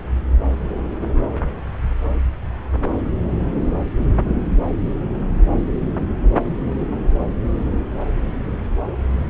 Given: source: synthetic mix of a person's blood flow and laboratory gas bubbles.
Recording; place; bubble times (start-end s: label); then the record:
Doppler ultrasound of blood flow; subclavian vein
no bubbles
From the record:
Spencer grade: 0 (complete lack of bubble signals)